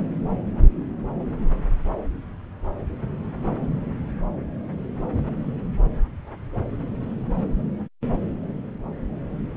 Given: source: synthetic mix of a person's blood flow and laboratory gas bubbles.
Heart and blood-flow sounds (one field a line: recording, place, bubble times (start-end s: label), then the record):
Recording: Doppler ultrasound of blood flow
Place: subclavian vein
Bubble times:
no bubbles
From the record:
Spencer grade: 0 (complete lack of bubble signals)